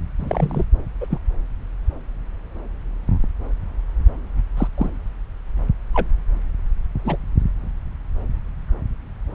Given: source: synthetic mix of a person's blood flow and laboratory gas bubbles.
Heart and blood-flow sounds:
Doppler ultrasound of blood flow; subclavian vein
0.19-0.66 s: bubbles
1.00-1.06 s: bubbles
1.10-1.19 s: bubbles
4.57-4.67 s: bubbles
4.78-4.89 s: bubbles
5.94-6.07 s: bubbles
7.04-7.17 s: bubbles
From the record:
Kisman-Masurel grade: 122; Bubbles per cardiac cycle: 1 to 2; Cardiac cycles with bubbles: 10 to 50%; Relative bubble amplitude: moderate (0.250 to 0.450); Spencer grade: 2 (many but less than half of the cardiac periods contain bubble signals, singularly or in groups); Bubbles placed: anywhere in the cardiac cycle

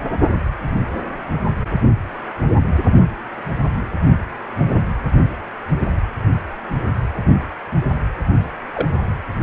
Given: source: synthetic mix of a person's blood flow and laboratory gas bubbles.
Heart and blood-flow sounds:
Doppler ultrasound of blood flow; precordium
8.73-8.88 s: bubbles
From the record:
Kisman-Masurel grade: 112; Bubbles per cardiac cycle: 1 to 2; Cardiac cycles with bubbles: 1 to 10%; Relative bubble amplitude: moderate (0.250 to 0.450); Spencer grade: 1 (occasional bubble signal discernible with the cardiac motion signal, with majority of cardiac periods free of bubbles); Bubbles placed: anywhere in the cardiac cycle

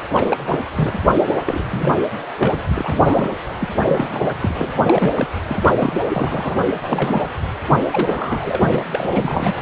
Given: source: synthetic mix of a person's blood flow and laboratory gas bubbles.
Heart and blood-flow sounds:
Doppler ultrasound of blood flow; precordium
0.14-0.43 s: bubbles
0.46-0.59 s: bubbles
0.76-0.99 s: bubbles
1.31-1.38 s: bubbles
1.48-1.63 s: bubbles
1.71-2.10 s: bubbles
2.39-2.63 s: bubbles
2.68-3.37 s: bubbles
3.60-3.69 s: bubbles
3.85-4.23 s: bubbles
4.29-4.33 s: bubbles
4.41-4.72 s: bubbles
4.87-5.26 s: bubbles
5.48-5.73 s: bubbles
5.79-6.02 s: bubbles
6.09-6.56 s: bubbles
6.82-7.28 s: bubbles
7.91-8.84 s: bubbles
8.92-9.54 s: bubbles
From the record:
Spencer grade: 3 (all of the cardiac periods contain showers or single bubble signals, but not dominating or overriding the cardiac motion signals); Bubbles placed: anywhere in the cardiac cycle

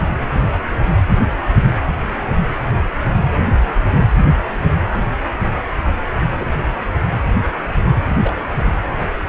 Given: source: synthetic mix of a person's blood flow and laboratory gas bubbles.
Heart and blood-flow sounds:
Doppler ultrasound of blood flow; precordium
6.38-6.54 s: bubbles
8.21-8.33 s: bubbles
8.36-8.39 s: bubbles
From the record:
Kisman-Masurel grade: 121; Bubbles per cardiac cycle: 1 to 2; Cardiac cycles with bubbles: 10 to 50%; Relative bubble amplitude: barely perceptible (0.100 to 0.250); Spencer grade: 2 (many but less than half of the cardiac periods contain bubble signals, singularly or in groups); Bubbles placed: anywhere in the cardiac cycle

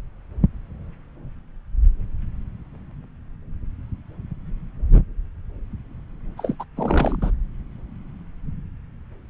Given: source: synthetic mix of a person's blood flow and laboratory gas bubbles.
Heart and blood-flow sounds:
Doppler ultrasound of blood flow; subclavian vein
6.37-6.55 s: bubbles
6.59-6.64 s: bubbles
6.76-7.31 s: bubbles
From the record:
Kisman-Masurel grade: 212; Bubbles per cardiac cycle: several, 3 to 8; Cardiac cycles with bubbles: 1 to 10%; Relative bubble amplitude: moderate (0.250 to 0.450); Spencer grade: 1 (occasional bubble signal discernible with the cardiac motion signal, with majority of cardiac periods free of bubbles); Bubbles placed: anywhere in the cardiac cycle

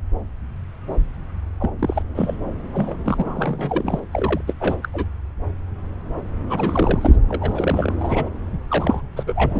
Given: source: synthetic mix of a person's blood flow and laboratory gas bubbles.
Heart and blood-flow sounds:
Doppler ultrasound of blood flow; subclavian vein
1.60-1.70 s: bubbles
1.79-2.02 s: bubbles
2.15-2.37 s: bubbles
2.73-2.96 s: bubbles
3.06-4.00 s: bubbles
4.11-4.41 s: bubbles
4.47-4.55 s: bubbles
4.60-4.75 s: bubbles
4.82-4.88 s: bubbles
4.93-5.05 s: bubbles
6.49-7.16 s: bubbles
7.29-7.93 s: bubbles
7.98-8.29 s: bubbles
8.53-8.57 s: bubbles
8.68-9.02 s: bubbles
9.16-9.23 s: bubbles
9.27-9.60 s: bubbles
From the record:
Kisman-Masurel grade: 332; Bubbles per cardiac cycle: rolling drumbeat, 9 or more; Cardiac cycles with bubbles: 50 to 99%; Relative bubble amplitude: moderate (0.250 to 0.450); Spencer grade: 3 (all of the cardiac periods contain showers or single bubble signals, but not dominating or overriding the cardiac motion signals); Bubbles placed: anywhere in the cardiac cycle

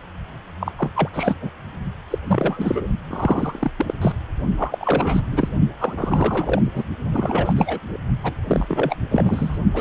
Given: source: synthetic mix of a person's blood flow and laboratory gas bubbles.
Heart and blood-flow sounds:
Doppler ultrasound of blood flow; precordium
0.60-0.71 s: bubbles
0.78-0.90 s: bubbles
0.95-1.09 s: bubbles
1.13-1.36 s: bubbles
1.41-1.51 s: bubbles
2.10-2.18 s: bubbles
2.27-2.88 s: bubbles
3.08-3.71 s: bubbles
3.78-3.94 s: bubbles
4.02-4.12 s: bubbles
4.57-4.78 s: bubbles
4.81-5.21 s: bubbles
5.32-5.49 s: bubbles
5.80-6.62 s: bubbles
6.65-6.84 s: bubbles
7.12-7.53 s: bubbles
7.56-7.79 s: bubbles
7.83-7.97 s: bubbles
8.23-8.34 s: bubbles
8.46-8.96 s: bubbles
9.10-9.58 s: bubbles
9.73-9.81 s: bubbles
From the record:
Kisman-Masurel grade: 342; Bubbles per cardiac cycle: rolling drumbeat, 9 or more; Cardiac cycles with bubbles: 100%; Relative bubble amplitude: moderate (0.250 to 0.450); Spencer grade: 3 (all of the cardiac periods contain showers or single bubble signals, but not dominating or overriding the cardiac motion signals); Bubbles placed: only in the low amplitude regions of the cardiac cycle

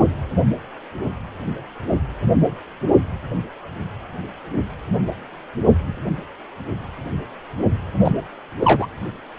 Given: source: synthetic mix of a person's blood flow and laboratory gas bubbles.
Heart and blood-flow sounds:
Doppler ultrasound of blood flow; precordium
8.04-8.12 s: bubbles
8.60-8.87 s: bubbles
From the record:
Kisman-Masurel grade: 213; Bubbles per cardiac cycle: several, 3 to 8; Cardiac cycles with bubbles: 1 to 10%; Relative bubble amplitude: loud (0.450 to 0.775); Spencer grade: 1 (occasional bubble signal discernible with the cardiac motion signal, with majority of cardiac periods free of bubbles); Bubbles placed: anywhere in the cardiac cycle

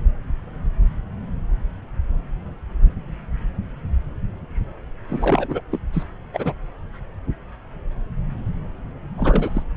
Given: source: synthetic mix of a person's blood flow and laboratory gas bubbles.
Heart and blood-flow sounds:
Doppler ultrasound of blood flow; subclavian vein
5.09-5.61 s: bubbles
5.71-5.79 s: bubbles
5.92-6.04 s: bubbles
6.33-6.53 s: bubbles
9.17-9.51 s: bubbles
9.54-9.62 s: bubbles
From the record:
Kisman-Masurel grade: 222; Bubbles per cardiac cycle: several, 3 to 8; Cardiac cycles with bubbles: 10 to 50%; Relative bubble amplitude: moderate (0.250 to 0.450); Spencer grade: 2 (many but less than half of the cardiac periods contain bubble signals, singularly or in groups); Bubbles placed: anywhere in the cardiac cycle

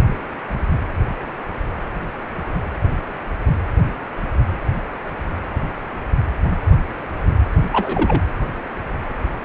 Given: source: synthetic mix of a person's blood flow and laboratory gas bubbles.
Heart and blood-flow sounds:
Doppler ultrasound of blood flow; precordium
7.72-8.23 s: bubbles
From the record:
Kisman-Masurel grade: 113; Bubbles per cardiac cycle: 1 to 2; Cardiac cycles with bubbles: 1 to 10%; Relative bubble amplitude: loud (0.450 to 0.775); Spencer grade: 1 (occasional bubble signal discernible with the cardiac motion signal, with majority of cardiac periods free of bubbles); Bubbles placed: anywhere in the cardiac cycle

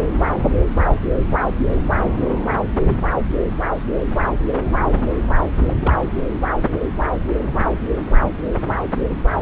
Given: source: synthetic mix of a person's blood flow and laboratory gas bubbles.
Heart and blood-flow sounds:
Doppler ultrasound of blood flow; subclavian vein
5.59-5.72 s: bubbles
5.75-5.93 s: bubbles
6.01-6.14 s: bubbles
6.38-6.46 s: bubbles
From the record:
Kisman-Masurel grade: 211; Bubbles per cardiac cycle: several, 3 to 8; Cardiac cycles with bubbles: 1 to 10%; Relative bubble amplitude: barely perceptible (0.100 to 0.250); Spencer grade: 1 (occasional bubble signal discernible with the cardiac motion signal, with majority of cardiac periods free of bubbles); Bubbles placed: anywhere in the cardiac cycle

